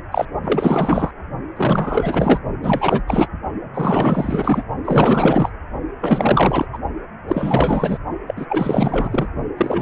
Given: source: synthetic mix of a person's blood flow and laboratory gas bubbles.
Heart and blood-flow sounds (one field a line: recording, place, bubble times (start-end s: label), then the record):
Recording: Doppler ultrasound of blood flow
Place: precordium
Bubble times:
0.11-0.25 s: bubbles
0.44-1.11 s: bubbles
1.56-2.40 s: bubbles
2.61-3.02 s: bubbles
3.07-3.28 s: bubbles
3.73-4.63 s: bubbles
4.84-5.50 s: bubbles
6.00-6.66 s: bubbles
6.72-6.78 s: bubbles
7.28-7.98 s: bubbles
8.27-8.46 s: bubbles
8.49-9.29 s: bubbles
9.57-9.82 s: bubbles
From the record:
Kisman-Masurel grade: 444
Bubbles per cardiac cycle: continuous sound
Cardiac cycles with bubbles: 100%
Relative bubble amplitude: maximal (0.775 to 0.999)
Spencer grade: 4 (maximum detectable bubble signal sounding continuously throughout systole and diastole of every cardiac period, and overriding the amplitude of the normal cardiac signals)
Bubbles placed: only in the low amplitude regions of the cardiac cycle